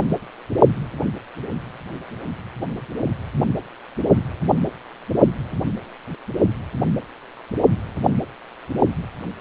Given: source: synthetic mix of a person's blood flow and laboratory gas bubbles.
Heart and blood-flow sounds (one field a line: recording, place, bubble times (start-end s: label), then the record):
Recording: Doppler ultrasound of blood flow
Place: precordium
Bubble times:
5.45-5.65 s: bubbles
From the record:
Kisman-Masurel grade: 111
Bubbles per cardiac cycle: 1 to 2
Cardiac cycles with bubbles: 1 to 10%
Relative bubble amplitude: barely perceptible (0.100 to 0.250)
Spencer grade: 1 (occasional bubble signal discernible with the cardiac motion signal, with majority of cardiac periods free of bubbles)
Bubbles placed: only in the low amplitude regions of the cardiac cycle